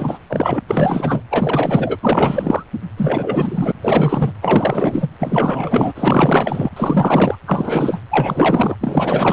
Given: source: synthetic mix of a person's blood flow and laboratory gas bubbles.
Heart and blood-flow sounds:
Doppler ultrasound of blood flow; precordium
0.00-0.19 s: bubbles
0.29-0.61 s: bubbles
0.68-1.23 s: bubbles
1.30-1.97 s: bubbles
2.01-2.63 s: bubbles
2.96-3.72 s: bubbles
3.82-4.31 s: bubbles
4.42-5.08 s: bubbles
5.19-6.70 s: bubbles
6.76-7.38 s: bubbles
7.46-8.01 s: bubbles
8.11-8.76 s: bubbles
8.80-9.32 s: bubbles
From the record:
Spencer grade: 4 (maximum detectable bubble signal sounding continuously throughout systole and diastole of every cardiac period, and overriding the amplitude of the normal cardiac signals); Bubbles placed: anywhere in the cardiac cycle

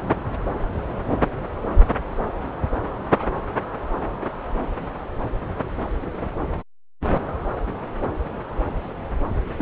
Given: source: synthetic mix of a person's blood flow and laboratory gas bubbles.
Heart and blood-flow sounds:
Doppler ultrasound of blood flow; subclavian vein
9.57-9.62 s: bubbles
From the record:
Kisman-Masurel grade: 111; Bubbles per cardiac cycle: 1 to 2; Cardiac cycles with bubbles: 1 to 10%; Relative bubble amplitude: barely perceptible (0.100 to 0.250); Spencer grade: 1 (occasional bubble signal discernible with the cardiac motion signal, with majority of cardiac periods free of bubbles); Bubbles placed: anywhere in the cardiac cycle

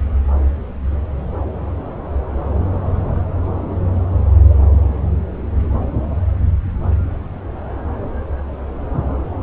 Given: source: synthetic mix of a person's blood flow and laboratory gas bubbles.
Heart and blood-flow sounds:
Doppler ultrasound of blood flow; subclavian vein
0.82-0.90 s: bubbles
4.46-4.56 s: bubbles
4.71-4.79 s: bubbles
From the record:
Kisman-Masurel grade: 121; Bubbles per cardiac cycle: 1 to 2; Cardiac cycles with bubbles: 10 to 50%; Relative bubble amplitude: barely perceptible (0.100 to 0.250); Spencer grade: 2 (many but less than half of the cardiac periods contain bubble signals, singularly or in groups); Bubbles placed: anywhere in the cardiac cycle

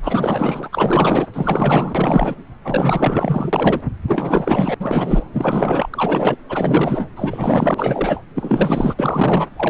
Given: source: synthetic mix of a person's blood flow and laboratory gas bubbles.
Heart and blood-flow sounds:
Doppler ultrasound of blood flow; subclavian vein
0.03-0.69 s: bubbles
0.72-1.27 s: bubbles
1.33-2.35 s: bubbles
2.63-3.81 s: bubbles
4.07-4.75 s: bubbles
4.79-5.24 s: bubbles
5.33-5.89 s: bubbles
5.92-6.37 s: bubbles
6.49-7.09 s: bubbles
7.16-8.21 s: bubbles
8.35-8.94 s: bubbles
8.98-9.47 s: bubbles
9.56-9.70 s: bubbles
From the record:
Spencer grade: 4 (maximum detectable bubble signal sounding continuously throughout systole and diastole of every cardiac period, and overriding the amplitude of the normal cardiac signals); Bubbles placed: anywhere in the cardiac cycle

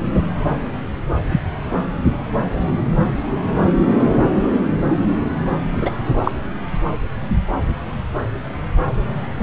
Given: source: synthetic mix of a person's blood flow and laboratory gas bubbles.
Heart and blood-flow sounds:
Doppler ultrasound of blood flow; subclavian vein
1.29-1.41 s: bubbles
5.72-5.95 s: bubbles
6.24-6.32 s: bubbles
From the record:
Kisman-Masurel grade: 113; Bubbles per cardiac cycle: 1 to 2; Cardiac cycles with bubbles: 1 to 10%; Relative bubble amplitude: loud (0.450 to 0.775); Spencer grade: 1 (occasional bubble signal discernible with the cardiac motion signal, with majority of cardiac periods free of bubbles); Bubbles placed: anywhere in the cardiac cycle

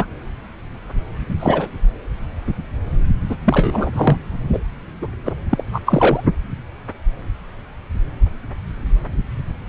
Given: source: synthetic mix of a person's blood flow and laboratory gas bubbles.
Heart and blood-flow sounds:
Doppler ultrasound of blood flow; subclavian vein
0.00-0.05 s: bubbles
1.29-1.35 s: bubbles
1.40-1.69 s: bubbles
3.29-3.36 s: bubbles
3.44-4.17 s: bubbles
4.53-4.59 s: bubbles
5.02-5.08 s: bubbles
5.25-5.32 s: bubbles
5.50-5.64 s: bubbles
5.73-5.81 s: bubbles
5.86-6.21 s: bubbles
From the record:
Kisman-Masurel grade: 233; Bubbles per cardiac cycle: several, 3 to 8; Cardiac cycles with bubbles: 50 to 99%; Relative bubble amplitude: loud (0.450 to 0.775); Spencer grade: 3 (all of the cardiac periods contain showers or single bubble signals, but not dominating or overriding the cardiac motion signals); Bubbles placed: anywhere in the cardiac cycle

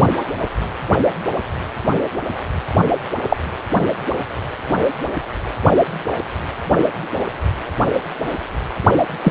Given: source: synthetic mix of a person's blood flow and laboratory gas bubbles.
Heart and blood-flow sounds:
Doppler ultrasound of blood flow; precordium
3.28-3.36 s: bubbles
9.22-9.31 s: bubbles
From the record:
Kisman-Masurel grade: 123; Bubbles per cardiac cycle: 1 to 2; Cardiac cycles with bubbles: 10 to 50%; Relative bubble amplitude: loud (0.450 to 0.775); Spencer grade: 2 (many but less than half of the cardiac periods contain bubble signals, singularly or in groups); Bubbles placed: only in the low amplitude regions of the cardiac cycle

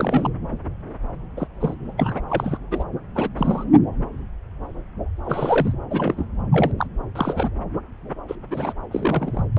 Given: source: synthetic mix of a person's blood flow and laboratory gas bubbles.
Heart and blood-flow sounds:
Doppler ultrasound of blood flow; subclavian vein
0.00-0.30 s: bubbles
1.36-1.47 s: bubbles
1.60-1.74 s: bubbles
1.98-2.21 s: bubbles
2.29-2.58 s: bubbles
2.71-2.84 s: bubbles
3.15-3.29 s: bubbles
3.36-3.64 s: bubbles
5.25-5.73 s: bubbles
5.90-6.26 s: bubbles
6.51-6.72 s: bubbles
6.78-6.87 s: bubbles
7.15-7.50 s: bubbles
8.28-8.35 s: bubbles
8.50-8.73 s: bubbles
8.91-9.46 s: bubbles
9.56-9.59 s: bubbles
From the record:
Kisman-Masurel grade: 232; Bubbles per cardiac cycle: several, 3 to 8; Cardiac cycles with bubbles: 50 to 99%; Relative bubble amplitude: moderate (0.250 to 0.450); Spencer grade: 3 (all of the cardiac periods contain showers or single bubble signals, but not dominating or overriding the cardiac motion signals); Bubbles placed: anywhere in the cardiac cycle

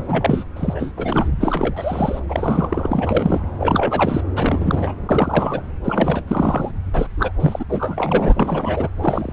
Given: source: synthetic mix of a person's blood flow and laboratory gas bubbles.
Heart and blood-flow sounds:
Doppler ultrasound of blood flow; subclavian vein
0.00-0.44 s: bubbles
0.56-0.91 s: bubbles
0.97-1.31 s: bubbles
1.40-2.19 s: bubbles
2.29-3.52 s: bubbles
3.58-4.21 s: bubbles
4.36-4.94 s: bubbles
5.08-5.61 s: bubbles
5.84-6.23 s: bubbles
6.27-6.71 s: bubbles
6.93-7.07 s: bubbles
7.17-7.32 s: bubbles
7.40-7.65 s: bubbles
7.69-8.89 s: bubbles
9.01-9.33 s: bubbles
From the record:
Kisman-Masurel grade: 343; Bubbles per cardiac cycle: rolling drumbeat, 9 or more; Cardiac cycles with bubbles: 100%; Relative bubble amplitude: loud (0.450 to 0.775); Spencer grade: 3 (all of the cardiac periods contain showers or single bubble signals, but not dominating or overriding the cardiac motion signals); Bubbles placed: anywhere in the cardiac cycle

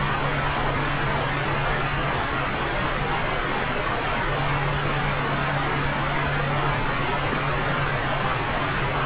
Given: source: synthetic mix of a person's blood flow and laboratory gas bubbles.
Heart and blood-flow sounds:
Doppler ultrasound of blood flow; subclavian vein
7.30-7.42 s: bubbles
From the record:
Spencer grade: 2 (many but less than half of the cardiac periods contain bubble signals, singularly or in groups); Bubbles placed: anywhere in the cardiac cycle

